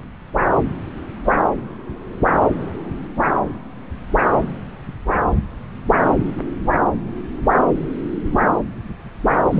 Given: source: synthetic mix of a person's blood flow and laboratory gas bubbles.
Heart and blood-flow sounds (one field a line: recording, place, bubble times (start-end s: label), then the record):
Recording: Doppler ultrasound of blood flow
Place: subclavian vein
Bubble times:
9.51-9.60 s: bubbles
From the record:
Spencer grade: 1 (occasional bubble signal discernible with the cardiac motion signal, with majority of cardiac periods free of bubbles)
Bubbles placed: anywhere in the cardiac cycle